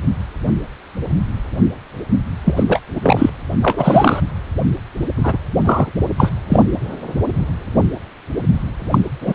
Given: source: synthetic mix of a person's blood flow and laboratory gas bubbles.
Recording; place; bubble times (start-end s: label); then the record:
Doppler ultrasound of blood flow; precordium
2.45-2.63 s: bubbles
2.67-2.81 s: bubbles
2.95-3.30 s: bubbles
3.62-4.20 s: bubbles
5.16-5.38 s: bubbles
5.64-5.91 s: bubbles
6.17-6.32 s: bubbles
6.49-6.64 s: bubbles
8.91-8.98 s: bubbles
9.21-9.34 s: bubbles
From the record:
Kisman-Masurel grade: 223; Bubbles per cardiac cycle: several, 3 to 8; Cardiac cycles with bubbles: 10 to 50%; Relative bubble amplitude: loud (0.450 to 0.775); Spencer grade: 2 (many but less than half of the cardiac periods contain bubble signals, singularly or in groups); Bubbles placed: anywhere in the cardiac cycle